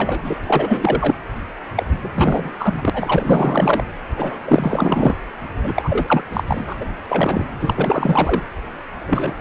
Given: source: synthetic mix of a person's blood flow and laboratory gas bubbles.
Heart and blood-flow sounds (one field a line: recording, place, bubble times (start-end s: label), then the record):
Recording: Doppler ultrasound of blood flow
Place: precordium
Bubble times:
0.00-0.40 s: bubbles
0.43-1.16 s: bubbles
1.76-1.84 s: bubbles
1.98-2.52 s: bubbles
2.58-2.90 s: bubbles
2.93-3.81 s: bubbles
4.16-4.39 s: bubbles
4.46-5.16 s: bubbles
5.63-6.22 s: bubbles
6.33-6.43 s: bubbles
6.47-6.76 s: bubbles
6.80-6.85 s: bubbles
7.08-7.44 s: bubbles
7.59-8.42 s: bubbles
9.07-9.33 s: bubbles
From the record:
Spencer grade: 4 (maximum detectable bubble signal sounding continuously throughout systole and diastole of every cardiac period, and overriding the amplitude of the normal cardiac signals)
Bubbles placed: anywhere in the cardiac cycle